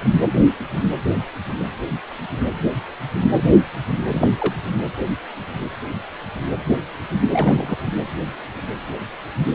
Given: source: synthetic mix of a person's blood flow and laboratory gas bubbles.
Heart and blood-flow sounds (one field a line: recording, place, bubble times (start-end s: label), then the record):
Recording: Doppler ultrasound of blood flow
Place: precordium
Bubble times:
4.08-4.27 s: bubbles
4.38-4.54 s: bubbles
7.31-7.77 s: bubbles
From the record:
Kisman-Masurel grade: 122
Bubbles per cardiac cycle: 1 to 2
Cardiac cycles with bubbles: 10 to 50%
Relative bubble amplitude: moderate (0.250 to 0.450)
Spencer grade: 2 (many but less than half of the cardiac periods contain bubble signals, singularly or in groups)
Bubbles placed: anywhere in the cardiac cycle